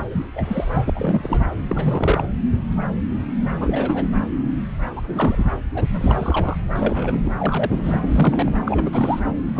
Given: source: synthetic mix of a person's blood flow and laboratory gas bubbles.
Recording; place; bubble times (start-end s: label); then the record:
Doppler ultrasound of blood flow; subclavian vein
0.11-0.26 s: bubbles
0.34-0.90 s: bubbles
0.95-1.50 s: bubbles
1.68-2.26 s: bubbles
3.60-4.10 s: bubbles
4.96-5.02 s: bubbles
5.06-5.49 s: bubbles
5.74-5.86 s: bubbles
5.89-6.57 s: bubbles
6.76-7.21 s: bubbles
7.24-7.30 s: bubbles
7.38-8.55 s: bubbles
8.64-9.20 s: bubbles
9.55-9.60 s: bubbles
From the record:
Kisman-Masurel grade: 332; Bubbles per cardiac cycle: rolling drumbeat, 9 or more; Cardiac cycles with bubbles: 50 to 99%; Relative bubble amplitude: moderate (0.250 to 0.450); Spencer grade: 3 (all of the cardiac periods contain showers or single bubble signals, but not dominating or overriding the cardiac motion signals); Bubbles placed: anywhere in the cardiac cycle